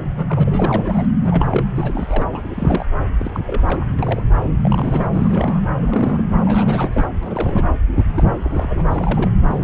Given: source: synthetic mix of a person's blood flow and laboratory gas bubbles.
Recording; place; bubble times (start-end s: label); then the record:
Doppler ultrasound of blood flow; subclavian vein
0.10-1.07 s: bubbles
1.25-1.69 s: bubbles
1.75-2.25 s: bubbles
2.31-2.86 s: bubbles
3.19-3.40 s: bubbles
3.46-3.85 s: bubbles
3.88-3.94 s: bubbles
3.98-4.22 s: bubbles
4.39-4.50 s: bubbles
4.61-5.07 s: bubbles
5.13-5.61 s: bubbles
5.79-6.22 s: bubbles
6.45-7.64 s: bubbles
7.95-8.04 s: bubbles
8.10-8.23 s: bubbles
8.38-8.87 s: bubbles
8.91-9.33 s: bubbles
9.49-9.63 s: bubbles
From the record:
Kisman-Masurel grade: 342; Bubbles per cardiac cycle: rolling drumbeat, 9 or more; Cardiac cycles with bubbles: 100%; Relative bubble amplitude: moderate (0.250 to 0.450); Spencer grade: 3 (all of the cardiac periods contain showers or single bubble signals, but not dominating or overriding the cardiac motion signals); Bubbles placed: anywhere in the cardiac cycle